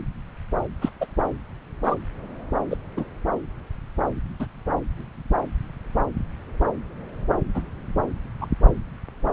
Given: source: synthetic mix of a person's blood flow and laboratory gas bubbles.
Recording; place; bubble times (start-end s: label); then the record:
Doppler ultrasound of blood flow; subclavian vein
0.81-0.90 s: bubbles
1.01-1.06 s: bubbles
1.83-1.95 s: bubbles
2.70-2.77 s: bubbles
2.96-3.04 s: bubbles
4.39-4.46 s: bubbles
7.54-7.62 s: bubbles
8.41-8.47 s: bubbles
From the record:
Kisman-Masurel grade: 122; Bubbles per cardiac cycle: 1 to 2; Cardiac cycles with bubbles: 10 to 50%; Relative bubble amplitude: moderate (0.250 to 0.450); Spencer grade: 2 (many but less than half of the cardiac periods contain bubble signals, singularly or in groups); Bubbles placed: anywhere in the cardiac cycle